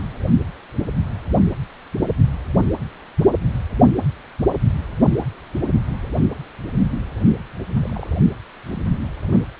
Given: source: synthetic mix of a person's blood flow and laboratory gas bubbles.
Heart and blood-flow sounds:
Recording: Doppler ultrasound of blood flow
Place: precordium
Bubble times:
7.79-8.06 s: bubbles
8.74-8.83 s: bubbles
9.31-9.40 s: bubbles
From the record:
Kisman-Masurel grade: 211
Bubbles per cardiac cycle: several, 3 to 8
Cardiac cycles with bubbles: 1 to 10%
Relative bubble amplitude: barely perceptible (0.100 to 0.250)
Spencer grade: 1 (occasional bubble signal discernible with the cardiac motion signal, with majority of cardiac periods free of bubbles)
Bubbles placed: anywhere in the cardiac cycle

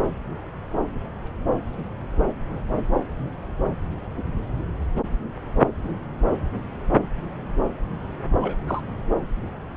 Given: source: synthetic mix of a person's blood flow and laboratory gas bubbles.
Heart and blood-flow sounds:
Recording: Doppler ultrasound of blood flow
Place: subclavian vein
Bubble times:
8.41-8.57 s: bubbles
8.67-8.81 s: bubbles
From the record:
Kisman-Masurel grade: 112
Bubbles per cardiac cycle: 1 to 2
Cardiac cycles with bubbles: 1 to 10%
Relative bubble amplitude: moderate (0.250 to 0.450)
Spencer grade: 1 (occasional bubble signal discernible with the cardiac motion signal, with majority of cardiac periods free of bubbles)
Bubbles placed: anywhere in the cardiac cycle

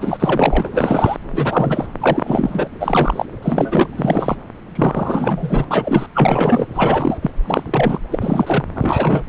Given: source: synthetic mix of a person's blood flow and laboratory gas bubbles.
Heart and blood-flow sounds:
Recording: Doppler ultrasound of blood flow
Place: subclavian vein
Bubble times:
0.01-1.18 s: bubbles
1.32-1.86 s: bubbles
2.00-2.67 s: bubbles
2.80-3.25 s: bubbles
3.42-3.88 s: bubbles
3.97-4.36 s: bubbles
4.75-5.65 s: bubbles
5.71-6.07 s: bubbles
6.14-6.66 s: bubbles
6.74-7.17 s: bubbles
7.22-7.31 s: bubbles
7.46-7.63 s: bubbles
7.66-7.99 s: bubbles
8.11-8.65 s: bubbles
8.74-9.23 s: bubbles
From the record:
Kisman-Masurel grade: 343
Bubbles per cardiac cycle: rolling drumbeat, 9 or more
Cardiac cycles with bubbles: 100%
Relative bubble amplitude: loud (0.450 to 0.775)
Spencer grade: 3 (all of the cardiac periods contain showers or single bubble signals, but not dominating or overriding the cardiac motion signals)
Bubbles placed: anywhere in the cardiac cycle

